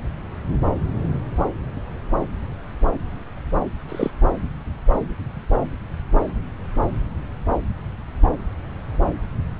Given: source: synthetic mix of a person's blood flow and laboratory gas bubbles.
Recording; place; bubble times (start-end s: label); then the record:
Doppler ultrasound of blood flow; subclavian vein
3.88-4.11 s: bubbles
From the record:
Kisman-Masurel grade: 123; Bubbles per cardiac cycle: 1 to 2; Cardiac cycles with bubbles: 10 to 50%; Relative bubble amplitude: loud (0.450 to 0.775); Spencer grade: 2 (many but less than half of the cardiac periods contain bubble signals, singularly or in groups); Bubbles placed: anywhere in the cardiac cycle